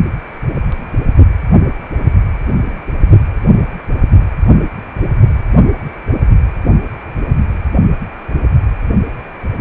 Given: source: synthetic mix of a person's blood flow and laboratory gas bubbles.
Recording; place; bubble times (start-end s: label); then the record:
Doppler ultrasound of blood flow; precordium
no bubbles
From the record:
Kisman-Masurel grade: 000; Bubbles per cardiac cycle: 0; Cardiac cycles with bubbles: 0%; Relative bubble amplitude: no bubbles discernible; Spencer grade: 0 (complete lack of bubble signals)